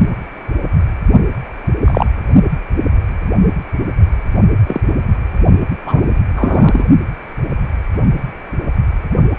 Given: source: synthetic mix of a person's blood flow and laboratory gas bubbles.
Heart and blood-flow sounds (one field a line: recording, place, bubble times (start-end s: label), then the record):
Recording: Doppler ultrasound of blood flow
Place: precordium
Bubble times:
1.84-2.06 s: bubbles
4.66-4.80 s: bubbles
5.86-6.01 s: bubbles
6.35-6.84 s: bubbles
From the record:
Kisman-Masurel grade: 123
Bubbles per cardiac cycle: 1 to 2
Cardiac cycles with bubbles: 10 to 50%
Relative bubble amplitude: loud (0.450 to 0.775)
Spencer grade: 2 (many but less than half of the cardiac periods contain bubble signals, singularly or in groups)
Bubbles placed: only in the low amplitude regions of the cardiac cycle